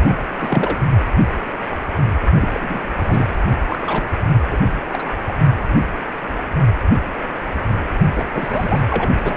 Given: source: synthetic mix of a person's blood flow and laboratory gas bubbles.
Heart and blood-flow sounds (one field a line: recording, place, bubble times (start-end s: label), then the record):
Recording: Doppler ultrasound of blood flow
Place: precordium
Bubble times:
0.00-0.16 s: bubbles
0.39-0.79 s: bubbles
2.41-2.81 s: bubbles
2.98-3.36 s: bubbles
3.70-4.09 s: bubbles
4.50-4.58 s: bubbles
4.92-5.11 s: bubbles
5.27-5.33 s: bubbles
8.15-8.25 s: bubbles
8.33-8.82 s: bubbles
8.89-9.09 s: bubbles
9.24-9.34 s: bubbles
From the record:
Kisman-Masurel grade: 232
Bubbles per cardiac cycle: several, 3 to 8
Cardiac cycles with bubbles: 50 to 99%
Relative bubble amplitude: moderate (0.250 to 0.450)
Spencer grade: 3 (all of the cardiac periods contain showers or single bubble signals, but not dominating or overriding the cardiac motion signals)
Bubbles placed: only in the low amplitude regions of the cardiac cycle